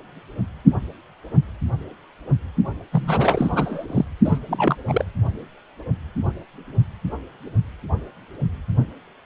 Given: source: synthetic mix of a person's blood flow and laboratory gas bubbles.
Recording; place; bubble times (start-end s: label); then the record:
Doppler ultrasound of blood flow; precordium
2.92-3.85 s: bubbles
3.88-4.04 s: bubbles
4.25-4.38 s: bubbles
4.48-4.76 s: bubbles
4.88-5.05 s: bubbles
From the record:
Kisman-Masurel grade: 222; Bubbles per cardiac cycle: several, 3 to 8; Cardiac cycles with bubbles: 10 to 50%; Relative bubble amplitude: moderate (0.250 to 0.450); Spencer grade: 2 (many but less than half of the cardiac periods contain bubble signals, singularly or in groups); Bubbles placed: only in the low amplitude regions of the cardiac cycle